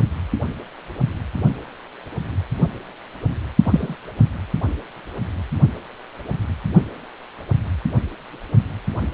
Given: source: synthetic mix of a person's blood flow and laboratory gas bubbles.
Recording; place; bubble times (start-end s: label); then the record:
Doppler ultrasound of blood flow; precordium
3.64-3.96 s: bubbles
From the record:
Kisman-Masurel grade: 113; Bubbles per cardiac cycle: 1 to 2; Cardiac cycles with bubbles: 1 to 10%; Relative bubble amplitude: loud (0.450 to 0.775); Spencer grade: 1 (occasional bubble signal discernible with the cardiac motion signal, with majority of cardiac periods free of bubbles); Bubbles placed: only in the low amplitude regions of the cardiac cycle